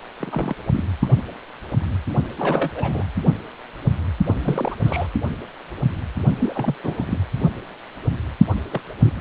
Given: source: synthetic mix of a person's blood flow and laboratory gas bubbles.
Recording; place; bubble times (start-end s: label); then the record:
Doppler ultrasound of blood flow; precordium
0.20-0.55 s: bubbles
0.72-0.83 s: bubbles
1.02-1.06 s: bubbles
2.38-2.70 s: bubbles
2.75-3.03 s: bubbles
4.26-4.34 s: bubbles
4.39-4.75 s: bubbles
4.85-5.07 s: bubbles
6.38-6.75 s: bubbles
6.83-7.18 s: bubbles
8.71-8.81 s: bubbles
9.02-9.13 s: bubbles
From the record:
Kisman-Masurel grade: 232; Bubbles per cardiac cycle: several, 3 to 8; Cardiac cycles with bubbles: 50 to 99%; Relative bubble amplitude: moderate (0.250 to 0.450); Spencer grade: 3 (all of the cardiac periods contain showers or single bubble signals, but not dominating or overriding the cardiac motion signals); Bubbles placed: only in the low amplitude regions of the cardiac cycle